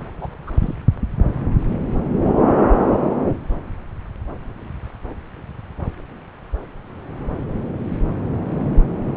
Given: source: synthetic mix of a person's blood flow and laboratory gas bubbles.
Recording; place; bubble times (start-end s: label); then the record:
Doppler ultrasound of blood flow; subclavian vein
0.19-0.27 s: bubbles
0.47-0.50 s: bubbles
0.60-0.74 s: bubbles
From the record:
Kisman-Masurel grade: 211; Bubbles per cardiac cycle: several, 3 to 8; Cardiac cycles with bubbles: 1 to 10%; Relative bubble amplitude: barely perceptible (0.100 to 0.250); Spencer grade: 1 (occasional bubble signal discernible with the cardiac motion signal, with majority of cardiac periods free of bubbles); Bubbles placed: anywhere in the cardiac cycle